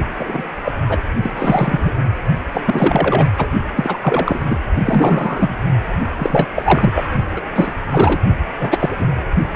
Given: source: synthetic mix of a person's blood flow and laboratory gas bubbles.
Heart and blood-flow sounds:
Doppler ultrasound of blood flow; precordium
0.18-0.44 s: bubbles
0.64-0.72 s: bubbles
0.82-1.00 s: bubbles
1.22-1.31 s: bubbles
1.36-1.92 s: bubbles
2.52-2.62 s: bubbles
2.66-3.27 s: bubbles
3.37-3.47 s: bubbles
3.75-3.98 s: bubbles
4.02-4.39 s: bubbles
4.49-4.58 s: bubbles
4.85-5.56 s: bubbles
6.17-6.50 s: bubbles
6.55-6.93 s: bubbles
6.95-7.04 s: bubbles
7.36-7.41 s: bubbles
7.55-7.74 s: bubbles
7.92-8.21 s: bubbles
8.59-9.06 s: bubbles
From the record:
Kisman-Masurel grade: 333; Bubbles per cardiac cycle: rolling drumbeat, 9 or more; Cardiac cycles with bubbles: 50 to 99%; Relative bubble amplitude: loud (0.450 to 0.775); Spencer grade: 3 (all of the cardiac periods contain showers or single bubble signals, but not dominating or overriding the cardiac motion signals); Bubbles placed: only in the low amplitude regions of the cardiac cycle

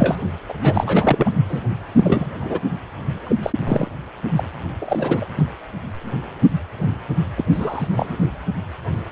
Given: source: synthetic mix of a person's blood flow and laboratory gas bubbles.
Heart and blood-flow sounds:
Doppler ultrasound of blood flow; precordium
0.00-0.16 s: bubbles
0.48-0.54 s: bubbles
0.61-1.29 s: bubbles
1.48-1.63 s: bubbles
1.95-2.27 s: bubbles
2.40-2.60 s: bubbles
3.27-3.36 s: bubbles
3.42-3.50 s: bubbles
3.66-3.88 s: bubbles
4.36-4.43 s: bubbles
4.79-5.27 s: bubbles
5.37-5.43 s: bubbles
7.37-7.44 s: bubbles
7.51-7.87 s: bubbles
7.91-8.17 s: bubbles
From the record:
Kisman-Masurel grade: 232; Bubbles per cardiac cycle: several, 3 to 8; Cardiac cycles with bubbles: 50 to 99%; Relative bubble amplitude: moderate (0.250 to 0.450); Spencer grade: 3 (all of the cardiac periods contain showers or single bubble signals, but not dominating or overriding the cardiac motion signals); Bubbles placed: anywhere in the cardiac cycle

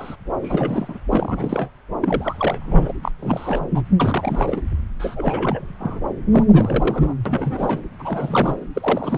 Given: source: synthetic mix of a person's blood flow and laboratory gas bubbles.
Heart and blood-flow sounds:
Doppler ultrasound of blood flow; subclavian vein
0.00-0.16 s: bubbles
0.39-0.98 s: bubbles
1.11-1.70 s: bubbles
2.01-2.92 s: bubbles
3.02-3.11 s: bubbles
3.19-3.68 s: bubbles
3.74-3.82 s: bubbles
3.99-4.64 s: bubbles
4.99-5.75 s: bubbles
5.80-6.00 s: bubbles
6.31-7.14 s: bubbles
7.25-7.83 s: bubbles
7.99-8.56 s: bubbles
8.73-9.18 s: bubbles
From the record:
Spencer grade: 3 (all of the cardiac periods contain showers or single bubble signals, but not dominating or overriding the cardiac motion signals); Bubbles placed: anywhere in the cardiac cycle

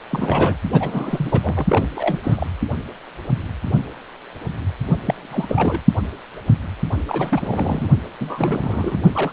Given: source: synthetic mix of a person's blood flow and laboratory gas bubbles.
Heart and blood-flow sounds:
Doppler ultrasound of blood flow; precordium
0.09-0.56 s: bubbles
0.72-1.66 s: bubbles
1.68-1.87 s: bubbles
1.95-2.20 s: bubbles
2.23-2.47 s: bubbles
5.05-5.14 s: bubbles
5.17-5.81 s: bubbles
7.07-7.88 s: bubbles
8.20-9.03 s: bubbles
9.12-9.31 s: bubbles
From the record:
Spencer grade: 3 (all of the cardiac periods contain showers or single bubble signals, but not dominating or overriding the cardiac motion signals); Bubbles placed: only in the low amplitude regions of the cardiac cycle

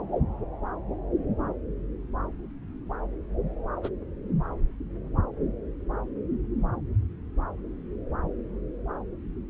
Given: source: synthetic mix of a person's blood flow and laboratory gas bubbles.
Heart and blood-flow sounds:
Doppler ultrasound of blood flow; subclavian vein
3.83-3.89 s: bubbles
From the record:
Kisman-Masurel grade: 122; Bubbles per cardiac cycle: 1 to 2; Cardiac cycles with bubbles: 10 to 50%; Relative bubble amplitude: moderate (0.250 to 0.450); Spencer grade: 2 (many but less than half of the cardiac periods contain bubble signals, singularly or in groups); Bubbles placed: anywhere in the cardiac cycle

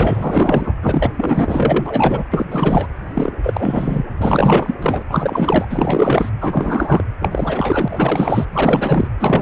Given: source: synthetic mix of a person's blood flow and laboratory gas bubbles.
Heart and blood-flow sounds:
Doppler ultrasound of blood flow; precordium
0.00-0.72 s: bubbles
0.82-1.12 s: bubbles
1.17-2.23 s: bubbles
2.30-2.46 s: bubbles
2.49-2.86 s: bubbles
3.15-3.32 s: bubbles
3.43-4.06 s: bubbles
4.19-4.75 s: bubbles
4.81-5.02 s: bubbles
5.09-5.65 s: bubbles
5.70-6.29 s: bubbles
6.41-7.04 s: bubbles
7.21-8.46 s: bubbles
8.52-9.07 s: bubbles
9.20-9.42 s: bubbles
From the record:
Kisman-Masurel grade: 444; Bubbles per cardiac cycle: continuous sound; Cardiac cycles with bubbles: 100%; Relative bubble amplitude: maximal (0.775 to 0.999); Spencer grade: 4 (maximum detectable bubble signal sounding continuously throughout systole and diastole of every cardiac period, and overriding the amplitude of the normal cardiac signals); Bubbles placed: anywhere in the cardiac cycle

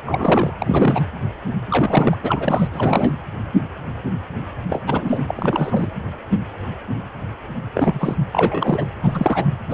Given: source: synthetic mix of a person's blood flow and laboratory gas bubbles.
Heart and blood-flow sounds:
Doppler ultrasound of blood flow; precordium
0.06-0.52 s: bubbles
0.58-1.03 s: bubbles
1.69-2.16 s: bubbles
2.23-2.67 s: bubbles
2.73-3.11 s: bubbles
4.70-4.83 s: bubbles
4.86-5.91 s: bubbles
7.74-8.16 s: bubbles
8.32-8.85 s: bubbles
9.03-9.45 s: bubbles
9.68-9.74 s: bubbles
From the record:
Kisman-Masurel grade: 333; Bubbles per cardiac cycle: rolling drumbeat, 9 or more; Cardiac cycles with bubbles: 50 to 99%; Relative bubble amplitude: loud (0.450 to 0.775); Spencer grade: 3 (all of the cardiac periods contain showers or single bubble signals, but not dominating or overriding the cardiac motion signals); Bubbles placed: anywhere in the cardiac cycle

